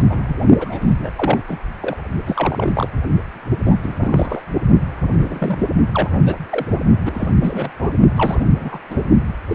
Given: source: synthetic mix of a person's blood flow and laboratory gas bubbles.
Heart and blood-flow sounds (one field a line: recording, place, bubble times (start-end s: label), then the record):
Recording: Doppler ultrasound of blood flow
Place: precordium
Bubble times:
0.00-0.03 s: bubbles
0.10-0.22 s: bubbles
0.27-0.38 s: bubbles
0.58-0.96 s: bubbles
1.03-1.10 s: bubbles
1.16-1.39 s: bubbles
1.48-1.58 s: bubbles
1.81-1.97 s: bubbles
2.26-2.88 s: bubbles
3.64-3.76 s: bubbles
3.83-3.95 s: bubbles
4.01-4.43 s: bubbles
5.09-5.68 s: bubbles
5.93-6.10 s: bubbles
6.25-6.36 s: bubbles
6.50-6.66 s: bubbles
7.05-7.28 s: bubbles
7.41-7.72 s: bubbles
7.79-7.90 s: bubbles
8.16-8.46 s: bubbles
8.56-8.79 s: bubbles
8.89-8.97 s: bubbles
9.49-9.55 s: bubbles
From the record:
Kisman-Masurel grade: 242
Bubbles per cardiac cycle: several, 3 to 8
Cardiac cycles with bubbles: 100%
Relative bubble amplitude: moderate (0.250 to 0.450)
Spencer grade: 3 (all of the cardiac periods contain showers or single bubble signals, but not dominating or overriding the cardiac motion signals)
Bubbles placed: only in the low amplitude regions of the cardiac cycle